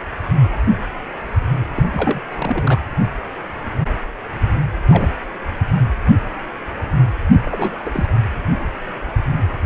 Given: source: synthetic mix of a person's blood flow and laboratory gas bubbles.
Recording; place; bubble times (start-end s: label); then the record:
Doppler ultrasound of blood flow; precordium
1.75-1.83 s: bubbles
1.92-2.21 s: bubbles
2.29-2.79 s: bubbles
4.88-5.09 s: bubbles
7.44-8.06 s: bubbles
From the record:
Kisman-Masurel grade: 222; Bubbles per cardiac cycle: several, 3 to 8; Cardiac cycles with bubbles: 10 to 50%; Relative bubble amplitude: moderate (0.250 to 0.450); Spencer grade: 2 (many but less than half of the cardiac periods contain bubble signals, singularly or in groups); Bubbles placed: anywhere in the cardiac cycle